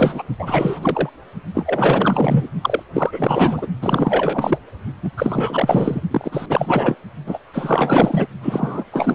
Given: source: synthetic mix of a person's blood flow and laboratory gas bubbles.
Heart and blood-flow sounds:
Doppler ultrasound of blood flow; precordium
0.00-0.24 s: bubbles
0.39-1.09 s: bubbles
1.54-2.50 s: bubbles
2.61-2.83 s: bubbles
2.94-3.67 s: bubbles
3.81-4.58 s: bubbles
5.02-5.12 s: bubbles
5.17-6.01 s: bubbles
6.10-6.46 s: bubbles
6.49-6.96 s: bubbles
7.26-7.38 s: bubbles
7.53-8.27 s: bubbles
8.42-8.83 s: bubbles
8.91-9.14 s: bubbles
From the record:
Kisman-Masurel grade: 444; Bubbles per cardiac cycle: continuous sound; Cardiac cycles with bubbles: 100%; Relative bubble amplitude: maximal (0.775 to 0.999); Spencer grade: 4 (maximum detectable bubble signal sounding continuously throughout systole and diastole of every cardiac period, and overriding the amplitude of the normal cardiac signals); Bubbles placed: only in the low amplitude regions of the cardiac cycle

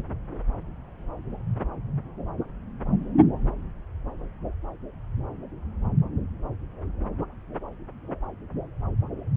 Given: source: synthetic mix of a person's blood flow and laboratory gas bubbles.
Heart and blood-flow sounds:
Doppler ultrasound of blood flow; subclavian vein
no bubbles
From the record:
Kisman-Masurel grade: 000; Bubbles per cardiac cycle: 0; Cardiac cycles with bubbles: 0%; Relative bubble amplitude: no bubbles discernible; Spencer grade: 0 (complete lack of bubble signals)

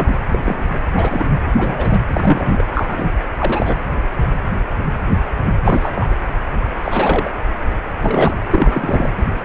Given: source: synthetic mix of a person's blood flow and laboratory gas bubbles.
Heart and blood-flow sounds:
Doppler ultrasound of blood flow; precordium
0.00-0.15 s: bubbles
0.29-0.41 s: bubbles
0.44-0.66 s: bubbles
0.95-1.30 s: bubbles
1.58-1.98 s: bubbles
2.13-2.64 s: bubbles
2.73-3.09 s: bubbles
3.37-3.80 s: bubbles
5.63-6.06 s: bubbles
6.11-6.15 s: bubbles
6.84-7.30 s: bubbles
8.01-8.34 s: bubbles
8.50-9.11 s: bubbles
From the record:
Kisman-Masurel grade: 232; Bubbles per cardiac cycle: several, 3 to 8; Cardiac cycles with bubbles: 50 to 99%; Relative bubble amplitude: moderate (0.250 to 0.450); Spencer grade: 3 (all of the cardiac periods contain showers or single bubble signals, but not dominating or overriding the cardiac motion signals); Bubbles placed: anywhere in the cardiac cycle

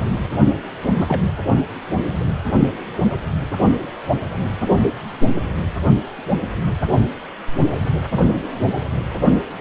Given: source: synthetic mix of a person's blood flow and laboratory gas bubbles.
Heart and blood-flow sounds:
Doppler ultrasound of blood flow; precordium
0.83-1.22 s: bubbles
From the record:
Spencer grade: 1 (occasional bubble signal discernible with the cardiac motion signal, with majority of cardiac periods free of bubbles); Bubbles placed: only in the low amplitude regions of the cardiac cycle

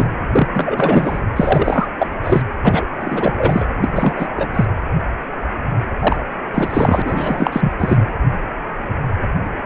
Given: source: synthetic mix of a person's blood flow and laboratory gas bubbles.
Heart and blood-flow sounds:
Doppler ultrasound of blood flow; precordium
0.00-0.09 s: bubbles
0.32-0.48 s: bubbles
0.55-1.21 s: bubbles
1.36-1.88 s: bubbles
1.98-2.07 s: bubbles
2.23-2.42 s: bubbles
2.63-2.86 s: bubbles
2.98-3.66 s: bubbles
3.81-4.27 s: bubbles
4.36-4.49 s: bubbles
4.54-4.65 s: bubbles
6.00-6.17 s: bubbles
6.54-7.73 s: bubbles
7.79-8.04 s: bubbles
From the record:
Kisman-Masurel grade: 333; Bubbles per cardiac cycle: rolling drumbeat, 9 or more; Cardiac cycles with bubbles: 50 to 99%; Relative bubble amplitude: loud (0.450 to 0.775); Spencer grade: 3 (all of the cardiac periods contain showers or single bubble signals, but not dominating or overriding the cardiac motion signals); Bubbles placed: anywhere in the cardiac cycle

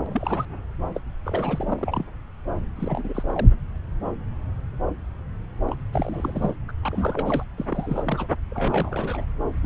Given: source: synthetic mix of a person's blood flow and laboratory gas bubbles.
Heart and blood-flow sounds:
Doppler ultrasound of blood flow; subclavian vein
0.06-0.45 s: bubbles
0.94-1.00 s: bubbles
1.24-2.05 s: bubbles
2.75-3.48 s: bubbles
5.67-5.76 s: bubbles
5.93-6.56 s: bubbles
6.68-6.73 s: bubbles
6.83-7.44 s: bubbles
7.58-8.28 s: bubbles
8.50-9.25 s: bubbles
9.62-9.66 s: bubbles
From the record:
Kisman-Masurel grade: 332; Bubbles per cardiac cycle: rolling drumbeat, 9 or more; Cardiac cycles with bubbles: 50 to 99%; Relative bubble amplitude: moderate (0.250 to 0.450); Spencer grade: 3 (all of the cardiac periods contain showers or single bubble signals, but not dominating or overriding the cardiac motion signals); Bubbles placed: anywhere in the cardiac cycle

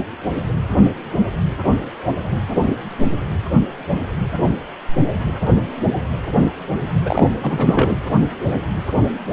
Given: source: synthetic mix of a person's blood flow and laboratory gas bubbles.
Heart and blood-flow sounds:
Doppler ultrasound of blood flow; precordium
7.06-7.33 s: bubbles
7.42-7.97 s: bubbles
From the record:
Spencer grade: 1 (occasional bubble signal discernible with the cardiac motion signal, with majority of cardiac periods free of bubbles); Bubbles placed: anywhere in the cardiac cycle

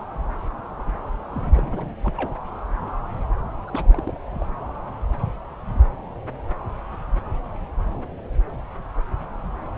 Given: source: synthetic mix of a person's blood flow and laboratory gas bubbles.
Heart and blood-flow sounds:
Doppler ultrasound of blood flow; subclavian vein
1.31-1.96 s: bubbles
2.04-2.35 s: bubbles
3.67-4.17 s: bubbles
4.38-4.46 s: bubbles
From the record:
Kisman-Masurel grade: 221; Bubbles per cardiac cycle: several, 3 to 8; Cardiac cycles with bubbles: 10 to 50%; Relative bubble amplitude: barely perceptible (0.100 to 0.250); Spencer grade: 2 (many but less than half of the cardiac periods contain bubble signals, singularly or in groups); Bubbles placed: anywhere in the cardiac cycle

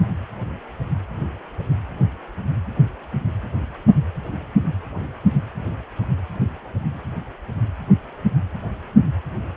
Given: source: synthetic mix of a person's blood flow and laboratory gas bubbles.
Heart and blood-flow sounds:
Doppler ultrasound of blood flow; precordium
no bubbles
From the record:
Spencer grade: 0 (complete lack of bubble signals)

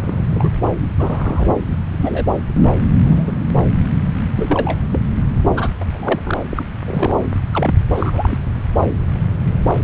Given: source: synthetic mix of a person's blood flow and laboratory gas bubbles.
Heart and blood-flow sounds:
Doppler ultrasound of blood flow; subclavian vein
0.00-0.27 s: bubbles
0.30-0.49 s: bubbles
0.80-0.86 s: bubbles
0.97-1.58 s: bubbles
1.70-1.78 s: bubbles
1.91-2.26 s: bubbles
3.06-3.32 s: bubbles
4.36-4.79 s: bubbles
4.92-5.00 s: bubbles
5.55-5.70 s: bubbles
5.80-5.86 s: bubbles
5.93-6.21 s: bubbles
6.25-6.38 s: bubbles
6.50-6.65 s: bubbles
6.87-7.14 s: bubbles
7.23-7.27 s: bubbles
7.52-7.75 s: bubbles
7.95-8.38 s: bubbles
From the record:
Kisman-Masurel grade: 232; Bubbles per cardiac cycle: several, 3 to 8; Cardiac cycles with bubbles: 50 to 99%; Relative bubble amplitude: moderate (0.250 to 0.450); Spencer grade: 3 (all of the cardiac periods contain showers or single bubble signals, but not dominating or overriding the cardiac motion signals); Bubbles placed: anywhere in the cardiac cycle

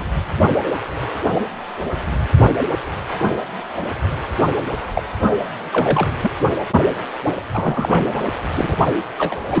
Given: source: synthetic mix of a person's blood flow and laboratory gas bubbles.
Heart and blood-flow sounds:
Doppler ultrasound of blood flow; precordium
0.00-0.04 s: bubbles
4.94-5.03 s: bubbles
5.71-6.08 s: bubbles
6.22-6.31 s: bubbles
7.25-7.32 s: bubbles
7.54-8.24 s: bubbles
8.55-8.78 s: bubbles
9.18-9.39 s: bubbles
9.50-9.60 s: bubbles
From the record:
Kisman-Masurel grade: 232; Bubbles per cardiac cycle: several, 3 to 8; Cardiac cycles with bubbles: 50 to 99%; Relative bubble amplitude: moderate (0.250 to 0.450); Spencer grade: 3 (all of the cardiac periods contain showers or single bubble signals, but not dominating or overriding the cardiac motion signals); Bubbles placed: anywhere in the cardiac cycle

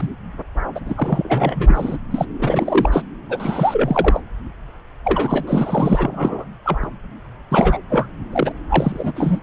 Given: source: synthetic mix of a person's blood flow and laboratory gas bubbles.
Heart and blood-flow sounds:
Doppler ultrasound of blood flow; subclavian vein
0.00-0.08 s: bubbles
0.75-0.80 s: bubbles
0.85-1.98 s: bubbles
2.10-2.26 s: bubbles
2.39-2.90 s: bubbles
2.92-3.03 s: bubbles
3.29-4.21 s: bubbles
5.04-6.45 s: bubbles
6.65-6.77 s: bubbles
6.83-6.87 s: bubbles
7.51-7.77 s: bubbles
7.89-8.06 s: bubbles
8.32-8.52 s: bubbles
8.70-9.12 s: bubbles
9.15-9.40 s: bubbles
From the record:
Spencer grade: 3 (all of the cardiac periods contain showers or single bubble signals, but not dominating or overriding the cardiac motion signals); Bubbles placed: anywhere in the cardiac cycle

